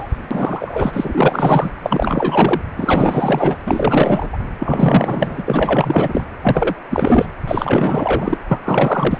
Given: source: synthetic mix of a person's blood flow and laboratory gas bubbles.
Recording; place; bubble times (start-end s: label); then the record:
Doppler ultrasound of blood flow; precordium
0.00-0.18 s: bubbles
0.30-1.70 s: bubbles
1.82-2.61 s: bubbles
2.77-3.58 s: bubbles
3.66-4.29 s: bubbles
4.32-4.38 s: bubbles
4.59-5.43 s: bubbles
5.46-6.28 s: bubbles
6.42-6.75 s: bubbles
6.90-7.26 s: bubbles
7.47-8.38 s: bubbles
8.48-8.59 s: bubbles
8.63-9.19 s: bubbles
From the record:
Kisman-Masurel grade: 444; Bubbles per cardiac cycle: continuous sound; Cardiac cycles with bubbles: 100%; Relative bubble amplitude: maximal (0.775 to 0.999); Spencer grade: 4 (maximum detectable bubble signal sounding continuously throughout systole and diastole of every cardiac period, and overriding the amplitude of the normal cardiac signals); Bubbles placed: anywhere in the cardiac cycle